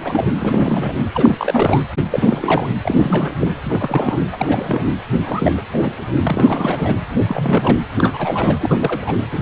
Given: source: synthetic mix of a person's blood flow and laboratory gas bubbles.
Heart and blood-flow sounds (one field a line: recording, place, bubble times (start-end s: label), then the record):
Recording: Doppler ultrasound of blood flow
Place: precordium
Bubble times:
0.04-0.24 s: bubbles
0.40-0.93 s: bubbles
1.15-1.82 s: bubbles
2.10-2.69 s: bubbles
2.84-3.37 s: bubbles
3.41-3.48 s: bubbles
3.69-4.20 s: bubbles
4.32-4.92 s: bubbles
5.24-5.54 s: bubbles
5.57-5.62 s: bubbles
5.73-5.96 s: bubbles
6.24-7.03 s: bubbles
7.22-7.78 s: bubbles
7.97-9.15 s: bubbles
9.31-9.42 s: bubbles
From the record:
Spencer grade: 3 (all of the cardiac periods contain showers or single bubble signals, but not dominating or overriding the cardiac motion signals)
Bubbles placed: anywhere in the cardiac cycle